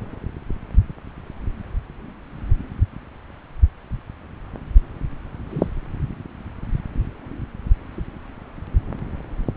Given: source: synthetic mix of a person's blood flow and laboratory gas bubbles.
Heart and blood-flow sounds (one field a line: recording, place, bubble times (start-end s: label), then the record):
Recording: Doppler ultrasound of blood flow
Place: subclavian vein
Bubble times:
5.49-5.68 s: bubbles
From the record:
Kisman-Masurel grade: 111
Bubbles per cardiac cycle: 1 to 2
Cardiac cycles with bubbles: 1 to 10%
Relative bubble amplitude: barely perceptible (0.100 to 0.250)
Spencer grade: 1 (occasional bubble signal discernible with the cardiac motion signal, with majority of cardiac periods free of bubbles)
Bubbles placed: anywhere in the cardiac cycle